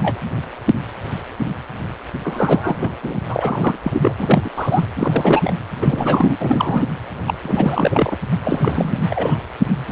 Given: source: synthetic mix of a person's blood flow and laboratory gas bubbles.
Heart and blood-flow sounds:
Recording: Doppler ultrasound of blood flow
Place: precordium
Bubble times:
0.00-0.18 s: bubbles
2.23-2.92 s: bubbles
3.02-3.19 s: bubbles
3.28-3.77 s: bubbles
3.83-4.16 s: bubbles
4.18-4.50 s: bubbles
4.56-4.86 s: bubbles
4.96-5.53 s: bubbles
5.82-6.37 s: bubbles
6.40-6.84 s: bubbles
7.27-7.34 s: bubbles
7.43-8.17 s: bubbles
8.44-9.00 s: bubbles
9.10-9.38 s: bubbles
9.89-9.92 s: bubbles
From the record:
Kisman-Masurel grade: 333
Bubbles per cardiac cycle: rolling drumbeat, 9 or more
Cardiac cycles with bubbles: 50 to 99%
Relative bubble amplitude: loud (0.450 to 0.775)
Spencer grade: 3 (all of the cardiac periods contain showers or single bubble signals, but not dominating or overriding the cardiac motion signals)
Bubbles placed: anywhere in the cardiac cycle

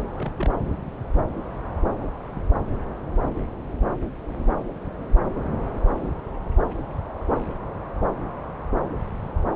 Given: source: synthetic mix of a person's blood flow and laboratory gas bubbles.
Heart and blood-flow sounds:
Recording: Doppler ultrasound of blood flow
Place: subclavian vein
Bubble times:
0.00-0.02 s: bubbles
0.05-0.31 s: bubbles
0.39-0.49 s: bubbles
From the record:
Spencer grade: 1 (occasional bubble signal discernible with the cardiac motion signal, with majority of cardiac periods free of bubbles)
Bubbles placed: anywhere in the cardiac cycle

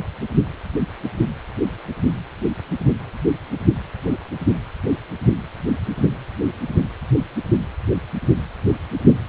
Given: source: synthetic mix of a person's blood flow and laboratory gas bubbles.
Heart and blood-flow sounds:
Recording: Doppler ultrasound of blood flow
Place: precordium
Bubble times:
no bubbles
From the record:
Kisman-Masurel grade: 000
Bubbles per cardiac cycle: 0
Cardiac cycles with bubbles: 0%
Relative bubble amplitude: no bubbles discernible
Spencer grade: 0 (complete lack of bubble signals)

